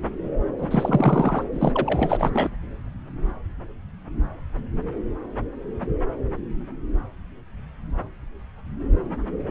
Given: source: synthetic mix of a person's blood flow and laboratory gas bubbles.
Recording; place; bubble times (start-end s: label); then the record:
Doppler ultrasound of blood flow; subclavian vein
0.58-1.44 s: bubbles
1.53-2.50 s: bubbles
From the record:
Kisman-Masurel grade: 223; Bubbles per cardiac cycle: several, 3 to 8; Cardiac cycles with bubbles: 10 to 50%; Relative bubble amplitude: loud (0.450 to 0.775); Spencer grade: 2 (many but less than half of the cardiac periods contain bubble signals, singularly or in groups); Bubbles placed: anywhere in the cardiac cycle